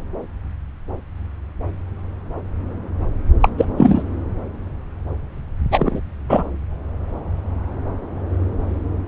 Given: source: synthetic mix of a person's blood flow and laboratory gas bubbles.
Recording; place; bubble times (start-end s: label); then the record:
Doppler ultrasound of blood flow; subclavian vein
3.40-3.49 s: bubbles
3.57-3.65 s: bubbles
3.76-4.02 s: bubbles
5.71-6.00 s: bubbles
6.29-6.43 s: bubbles
From the record:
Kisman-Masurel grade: 213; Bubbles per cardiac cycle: several, 3 to 8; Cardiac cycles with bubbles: 1 to 10%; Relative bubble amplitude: loud (0.450 to 0.775); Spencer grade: 1 (occasional bubble signal discernible with the cardiac motion signal, with majority of cardiac periods free of bubbles); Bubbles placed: anywhere in the cardiac cycle